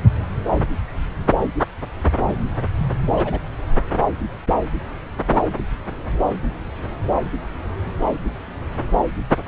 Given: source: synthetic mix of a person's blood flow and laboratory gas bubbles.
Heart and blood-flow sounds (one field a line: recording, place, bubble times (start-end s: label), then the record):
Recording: Doppler ultrasound of blood flow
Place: subclavian vein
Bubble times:
3.17-3.40 s: bubbles
From the record:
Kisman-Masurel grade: 112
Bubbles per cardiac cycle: 1 to 2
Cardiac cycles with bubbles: 1 to 10%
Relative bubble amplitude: moderate (0.250 to 0.450)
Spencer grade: 1 (occasional bubble signal discernible with the cardiac motion signal, with majority of cardiac periods free of bubbles)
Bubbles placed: anywhere in the cardiac cycle